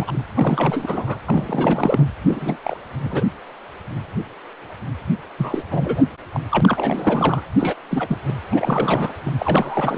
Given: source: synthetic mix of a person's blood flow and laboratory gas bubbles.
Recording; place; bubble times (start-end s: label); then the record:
Doppler ultrasound of blood flow; precordium
0.00-0.12 s: bubbles
0.14-0.21 s: bubbles
0.35-1.19 s: bubbles
1.25-2.06 s: bubbles
2.28-2.57 s: bubbles
2.63-2.79 s: bubbles
3.03-3.25 s: bubbles
5.38-5.63 s: bubbles
5.71-6.02 s: bubbles
6.33-6.41 s: bubbles
6.51-7.43 s: bubbles
7.59-7.76 s: bubbles
7.90-8.19 s: bubbles
8.28-8.33 s: bubbles
8.52-9.14 s: bubbles
9.26-9.31 s: bubbles
9.38-9.98 s: bubbles
From the record:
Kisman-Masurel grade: 332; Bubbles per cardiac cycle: rolling drumbeat, 9 or more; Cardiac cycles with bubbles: 50 to 99%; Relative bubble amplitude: moderate (0.250 to 0.450); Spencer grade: 3 (all of the cardiac periods contain showers or single bubble signals, but not dominating or overriding the cardiac motion signals); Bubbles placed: anywhere in the cardiac cycle